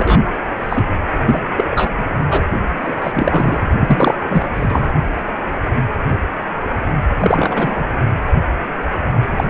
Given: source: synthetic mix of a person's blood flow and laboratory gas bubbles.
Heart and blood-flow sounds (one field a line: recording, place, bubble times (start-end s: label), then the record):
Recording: Doppler ultrasound of blood flow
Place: precordium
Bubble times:
0.00-0.30 s: bubbles
0.61-0.89 s: bubbles
1.26-1.48 s: bubbles
1.57-1.65 s: bubbles
1.71-2.04 s: bubbles
2.30-2.41 s: bubbles
2.81-2.94 s: bubbles
3.02-3.60 s: bubbles
3.79-4.15 s: bubbles
4.29-4.50 s: bubbles
4.55-4.92 s: bubbles
7.20-7.84 s: bubbles
9.37-9.44 s: bubbles
From the record:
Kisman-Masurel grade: 233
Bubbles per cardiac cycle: several, 3 to 8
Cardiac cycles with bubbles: 50 to 99%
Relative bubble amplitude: loud (0.450 to 0.775)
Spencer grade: 3 (all of the cardiac periods contain showers or single bubble signals, but not dominating or overriding the cardiac motion signals)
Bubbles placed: anywhere in the cardiac cycle